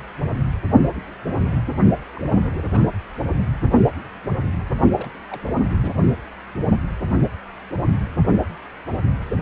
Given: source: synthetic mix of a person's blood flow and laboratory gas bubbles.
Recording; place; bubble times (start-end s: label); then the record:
Doppler ultrasound of blood flow; precordium
2.16-2.79 s: bubbles
4.98-5.10 s: bubbles
5.30-5.40 s: bubbles
5.47-5.64 s: bubbles
5.82-5.92 s: bubbles
From the record:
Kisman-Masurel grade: 221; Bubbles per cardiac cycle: several, 3 to 8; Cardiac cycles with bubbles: 10 to 50%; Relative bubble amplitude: barely perceptible (0.100 to 0.250); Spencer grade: 2 (many but less than half of the cardiac periods contain bubble signals, singularly or in groups); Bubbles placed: only in the low amplitude regions of the cardiac cycle